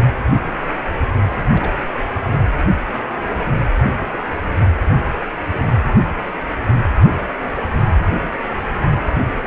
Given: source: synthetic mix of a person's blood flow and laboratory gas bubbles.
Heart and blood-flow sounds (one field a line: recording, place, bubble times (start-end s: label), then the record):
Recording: Doppler ultrasound of blood flow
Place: precordium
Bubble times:
1.53-1.72 s: bubbles
2.25-2.43 s: bubbles
3.81-4.06 s: bubbles
From the record:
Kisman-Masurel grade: 121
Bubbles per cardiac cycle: 1 to 2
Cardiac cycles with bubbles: 10 to 50%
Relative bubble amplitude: barely perceptible (0.100 to 0.250)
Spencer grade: 2 (many but less than half of the cardiac periods contain bubble signals, singularly or in groups)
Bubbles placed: anywhere in the cardiac cycle